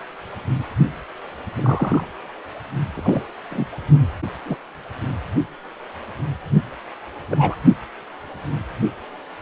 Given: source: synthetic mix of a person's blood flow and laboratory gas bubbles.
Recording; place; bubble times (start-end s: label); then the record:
Doppler ultrasound of blood flow; precordium
1.57-2.06 s: bubbles
2.94-3.27 s: bubbles
3.50-3.65 s: bubbles
4.45-4.57 s: bubbles
7.30-7.56 s: bubbles
From the record:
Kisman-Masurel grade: 122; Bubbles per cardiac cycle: 1 to 2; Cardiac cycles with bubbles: 10 to 50%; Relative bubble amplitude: moderate (0.250 to 0.450); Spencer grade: 2 (many but less than half of the cardiac periods contain bubble signals, singularly or in groups); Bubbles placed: only in the low amplitude regions of the cardiac cycle